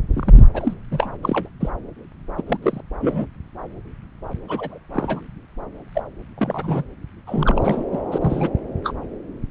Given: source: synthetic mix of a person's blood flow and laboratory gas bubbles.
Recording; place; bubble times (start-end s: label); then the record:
Doppler ultrasound of blood flow; subclavian vein
0.13-0.46 s: bubbles
0.54-0.74 s: bubbles
0.91-1.12 s: bubbles
1.23-1.49 s: bubbles
1.60-1.69 s: bubbles
2.38-2.42 s: bubbles
2.46-2.57 s: bubbles
2.62-2.81 s: bubbles
3.01-3.25 s: bubbles
4.48-4.79 s: bubbles
4.93-5.21 s: bubbles
5.95-6.03 s: bubbles
6.38-6.83 s: bubbles
7.27-7.87 s: bubbles
7.92-8.00 s: bubbles
8.12-8.18 s: bubbles
8.21-8.49 s: bubbles
8.83-8.92 s: bubbles
From the record:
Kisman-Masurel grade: 232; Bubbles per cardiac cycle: several, 3 to 8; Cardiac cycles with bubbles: 50 to 99%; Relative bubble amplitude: moderate (0.250 to 0.450); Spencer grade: 3 (all of the cardiac periods contain showers or single bubble signals, but not dominating or overriding the cardiac motion signals); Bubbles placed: anywhere in the cardiac cycle